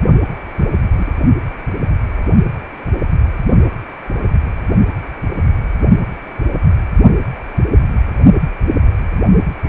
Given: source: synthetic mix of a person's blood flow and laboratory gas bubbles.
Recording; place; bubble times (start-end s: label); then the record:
Doppler ultrasound of blood flow; precordium
0.26-0.35 s: bubbles
0.57-0.68 s: bubbles
0.95-1.12 s: bubbles
From the record:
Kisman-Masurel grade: 211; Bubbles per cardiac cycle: several, 3 to 8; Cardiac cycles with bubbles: 1 to 10%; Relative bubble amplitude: barely perceptible (0.100 to 0.250); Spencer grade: 1 (occasional bubble signal discernible with the cardiac motion signal, with majority of cardiac periods free of bubbles); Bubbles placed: only in the low amplitude regions of the cardiac cycle